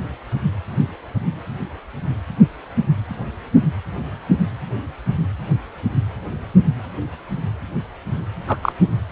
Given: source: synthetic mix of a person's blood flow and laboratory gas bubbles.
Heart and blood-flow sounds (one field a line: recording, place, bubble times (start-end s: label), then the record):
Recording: Doppler ultrasound of blood flow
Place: precordium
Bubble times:
8.47-8.57 s: bubbles
8.62-8.72 s: bubbles
From the record:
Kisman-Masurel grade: 113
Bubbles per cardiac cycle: 1 to 2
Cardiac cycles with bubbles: 1 to 10%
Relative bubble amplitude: loud (0.450 to 0.775)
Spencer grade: 1 (occasional bubble signal discernible with the cardiac motion signal, with majority of cardiac periods free of bubbles)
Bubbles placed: anywhere in the cardiac cycle